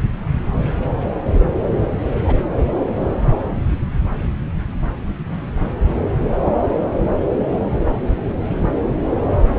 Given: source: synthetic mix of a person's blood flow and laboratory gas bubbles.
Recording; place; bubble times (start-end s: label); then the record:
Doppler ultrasound of blood flow; subclavian vein
2.24-2.38 s: bubbles
From the record:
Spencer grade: 1 (occasional bubble signal discernible with the cardiac motion signal, with majority of cardiac periods free of bubbles); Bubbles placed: anywhere in the cardiac cycle